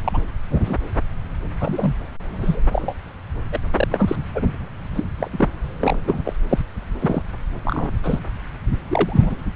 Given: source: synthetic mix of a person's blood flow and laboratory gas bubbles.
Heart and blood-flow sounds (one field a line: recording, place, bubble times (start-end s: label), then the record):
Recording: Doppler ultrasound of blood flow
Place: subclavian vein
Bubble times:
0.04-0.21 s: bubbles
0.49-0.77 s: bubbles
1.60-1.92 s: bubbles
2.29-2.61 s: bubbles
2.72-2.96 s: bubbles
3.52-3.60 s: bubbles
3.75-3.88 s: bubbles
3.91-4.16 s: bubbles
4.34-4.58 s: bubbles
4.95-5.04 s: bubbles
5.18-5.48 s: bubbles
5.79-5.99 s: bubbles
6.04-6.33 s: bubbles
6.49-6.65 s: bubbles
7.00-7.22 s: bubbles
7.65-7.92 s: bubbles
8.03-8.20 s: bubbles
8.90-9.36 s: bubbles
From the record:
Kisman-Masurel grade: 243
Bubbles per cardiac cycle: several, 3 to 8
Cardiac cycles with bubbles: 100%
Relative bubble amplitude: loud (0.450 to 0.775)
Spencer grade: 3 (all of the cardiac periods contain showers or single bubble signals, but not dominating or overriding the cardiac motion signals)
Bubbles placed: anywhere in the cardiac cycle